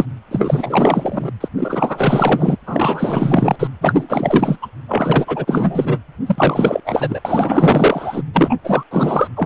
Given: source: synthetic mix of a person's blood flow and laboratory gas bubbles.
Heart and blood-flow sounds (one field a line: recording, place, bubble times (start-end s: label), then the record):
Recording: Doppler ultrasound of blood flow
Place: precordium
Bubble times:
0.00-0.05 s: bubbles
0.30-1.31 s: bubbles
1.40-1.48 s: bubbles
1.56-2.56 s: bubbles
2.66-3.67 s: bubbles
3.81-4.58 s: bubbles
4.62-4.67 s: bubbles
4.88-5.99 s: bubbles
6.26-6.81 s: bubbles
6.86-7.21 s: bubbles
7.25-8.22 s: bubbles
8.33-8.55 s: bubbles
8.64-8.84 s: bubbles
8.91-9.28 s: bubbles
9.36-9.46 s: bubbles
From the record:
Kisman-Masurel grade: 444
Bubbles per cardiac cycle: continuous sound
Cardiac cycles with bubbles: 100%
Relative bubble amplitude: maximal (0.775 to 0.999)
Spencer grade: 4 (maximum detectable bubble signal sounding continuously throughout systole and diastole of every cardiac period, and overriding the amplitude of the normal cardiac signals)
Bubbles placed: anywhere in the cardiac cycle